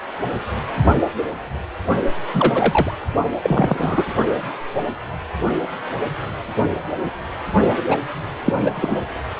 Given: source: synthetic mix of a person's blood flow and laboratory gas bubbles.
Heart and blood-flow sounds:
Doppler ultrasound of blood flow; precordium
2.32-2.92 s: bubbles
3.42-4.08 s: bubbles
7.76-7.83 s: bubbles
7.89-7.98 s: bubbles
8.45-8.53 s: bubbles
8.61-9.07 s: bubbles
From the record:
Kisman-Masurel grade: 233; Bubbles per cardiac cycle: several, 3 to 8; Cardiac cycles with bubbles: 50 to 99%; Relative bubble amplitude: loud (0.450 to 0.775); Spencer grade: 3 (all of the cardiac periods contain showers or single bubble signals, but not dominating or overriding the cardiac motion signals); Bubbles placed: only in the low amplitude regions of the cardiac cycle

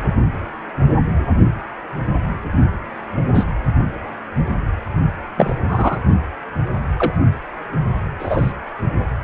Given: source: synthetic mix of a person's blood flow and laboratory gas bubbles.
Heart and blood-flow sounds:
Doppler ultrasound of blood flow; precordium
3.35-3.44 s: bubbles
5.37-5.55 s: bubbles
5.67-5.99 s: bubbles
6.96-7.12 s: bubbles
8.19-8.53 s: bubbles
From the record:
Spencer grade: 2 (many but less than half of the cardiac periods contain bubble signals, singularly or in groups); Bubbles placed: only in the low amplitude regions of the cardiac cycle

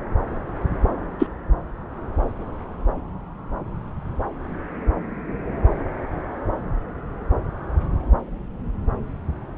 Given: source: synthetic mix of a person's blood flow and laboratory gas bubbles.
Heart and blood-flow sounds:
Doppler ultrasound of blood flow; subclavian vein
1.19-1.27 s: bubbles
From the record:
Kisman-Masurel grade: 113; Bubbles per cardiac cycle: 1 to 2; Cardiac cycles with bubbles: 1 to 10%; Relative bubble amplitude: loud (0.450 to 0.775); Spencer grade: 1 (occasional bubble signal discernible with the cardiac motion signal, with majority of cardiac periods free of bubbles); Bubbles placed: anywhere in the cardiac cycle

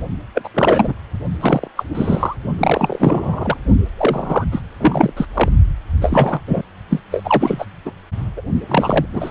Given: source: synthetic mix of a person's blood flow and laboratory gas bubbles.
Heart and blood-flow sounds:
Doppler ultrasound of blood flow; precordium
0.34-0.48 s: bubbles
0.54-0.93 s: bubbles
1.41-1.68 s: bubbles
1.77-1.84 s: bubbles
1.95-2.36 s: bubbles
2.58-3.57 s: bubbles
3.97-4.45 s: bubbles
4.52-4.61 s: bubbles
4.79-5.13 s: bubbles
5.17-5.25 s: bubbles
5.33-5.49 s: bubbles
6.00-6.41 s: bubbles
6.47-6.62 s: bubbles
6.90-7.00 s: bubbles
7.11-7.66 s: bubbles
7.85-7.92 s: bubbles
8.36-8.42 s: bubbles
8.69-9.05 s: bubbles
9.13-9.31 s: bubbles
From the record:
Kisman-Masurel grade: 343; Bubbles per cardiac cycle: rolling drumbeat, 9 or more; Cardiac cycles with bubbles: 100%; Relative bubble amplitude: loud (0.450 to 0.775); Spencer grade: 3 (all of the cardiac periods contain showers or single bubble signals, but not dominating or overriding the cardiac motion signals); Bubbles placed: only in the low amplitude regions of the cardiac cycle

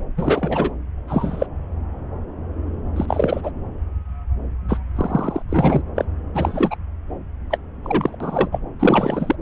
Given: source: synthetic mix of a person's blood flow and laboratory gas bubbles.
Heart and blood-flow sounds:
Doppler ultrasound of blood flow; subclavian vein
0.16-0.72 s: bubbles
1.07-1.47 s: bubbles
2.96-3.06 s: bubbles
3.08-3.50 s: bubbles
4.69-4.79 s: bubbles
4.95-5.43 s: bubbles
5.49-5.81 s: bubbles
5.96-6.05 s: bubbles
6.35-6.76 s: bubbles
7.51-7.58 s: bubbles
7.84-8.16 s: bubbles
8.20-8.49 s: bubbles
8.52-8.59 s: bubbles
8.79-9.36 s: bubbles
From the record:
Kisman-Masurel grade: 232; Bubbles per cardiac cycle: several, 3 to 8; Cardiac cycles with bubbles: 50 to 99%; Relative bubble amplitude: moderate (0.250 to 0.450); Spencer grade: 3 (all of the cardiac periods contain showers or single bubble signals, but not dominating or overriding the cardiac motion signals); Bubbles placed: anywhere in the cardiac cycle

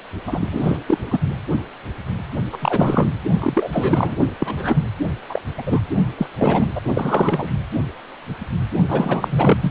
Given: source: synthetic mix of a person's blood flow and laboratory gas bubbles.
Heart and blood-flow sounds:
Doppler ultrasound of blood flow; precordium
0.27-0.49 s: bubbles
0.52-0.77 s: bubbles
0.88-0.98 s: bubbles
1.00-1.20 s: bubbles
2.52-2.58 s: bubbles
2.61-3.11 s: bubbles
3.38-3.70 s: bubbles
3.72-4.17 s: bubbles
4.38-4.88 s: bubbles
5.29-5.42 s: bubbles
5.58-5.62 s: bubbles
5.66-5.81 s: bubbles
6.17-6.27 s: bubbles
6.36-6.69 s: bubbles
6.75-6.81 s: bubbles
6.94-7.51 s: bubbles
8.88-9.71 s: bubbles
From the record:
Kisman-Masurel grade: 333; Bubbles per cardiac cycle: rolling drumbeat, 9 or more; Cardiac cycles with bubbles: 50 to 99%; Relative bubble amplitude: loud (0.450 to 0.775); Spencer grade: 3 (all of the cardiac periods contain showers or single bubble signals, but not dominating or overriding the cardiac motion signals); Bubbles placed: only in the low amplitude regions of the cardiac cycle

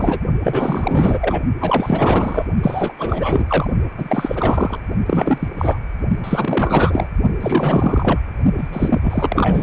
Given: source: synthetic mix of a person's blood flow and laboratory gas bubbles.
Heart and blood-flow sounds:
Doppler ultrasound of blood flow; precordium
0.00-0.20 s: bubbles
0.43-1.41 s: bubbles
1.57-2.46 s: bubbles
2.62-2.93 s: bubbles
2.98-3.71 s: bubbles
3.97-4.77 s: bubbles
5.06-5.48 s: bubbles
5.58-5.79 s: bubbles
6.23-7.08 s: bubbles
7.40-8.21 s: bubbles
8.58-9.63 s: bubbles
From the record:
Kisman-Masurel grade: 444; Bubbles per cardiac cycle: continuous sound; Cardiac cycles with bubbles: 100%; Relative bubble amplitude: maximal (0.775 to 0.999); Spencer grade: 4 (maximum detectable bubble signal sounding continuously throughout systole and diastole of every cardiac period, and overriding the amplitude of the normal cardiac signals); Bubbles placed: only in the low amplitude regions of the cardiac cycle

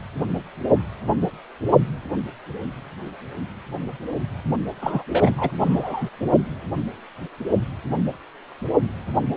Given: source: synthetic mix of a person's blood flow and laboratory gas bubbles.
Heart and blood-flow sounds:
Doppler ultrasound of blood flow; precordium
4.81-5.03 s: bubbles
5.10-5.30 s: bubbles
5.38-5.51 s: bubbles
5.58-6.09 s: bubbles
From the record:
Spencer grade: 1 (occasional bubble signal discernible with the cardiac motion signal, with majority of cardiac periods free of bubbles); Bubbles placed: only in the low amplitude regions of the cardiac cycle

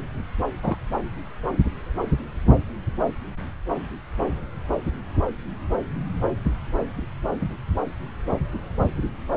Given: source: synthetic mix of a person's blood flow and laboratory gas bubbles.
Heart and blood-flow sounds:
Doppler ultrasound of blood flow; subclavian vein
0.61-0.78 s: bubbles
From the record:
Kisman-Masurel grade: 112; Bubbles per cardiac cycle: 1 to 2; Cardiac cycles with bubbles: 1 to 10%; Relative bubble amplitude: moderate (0.250 to 0.450); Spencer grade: 1 (occasional bubble signal discernible with the cardiac motion signal, with majority of cardiac periods free of bubbles); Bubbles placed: anywhere in the cardiac cycle

